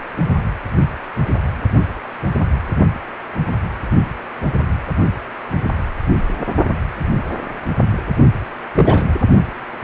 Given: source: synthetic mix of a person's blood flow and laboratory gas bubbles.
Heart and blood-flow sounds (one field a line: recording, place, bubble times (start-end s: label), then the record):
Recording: Doppler ultrasound of blood flow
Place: precordium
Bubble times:
8.74-9.04 s: bubbles
From the record:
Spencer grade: 1 (occasional bubble signal discernible with the cardiac motion signal, with majority of cardiac periods free of bubbles)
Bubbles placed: only in the low amplitude regions of the cardiac cycle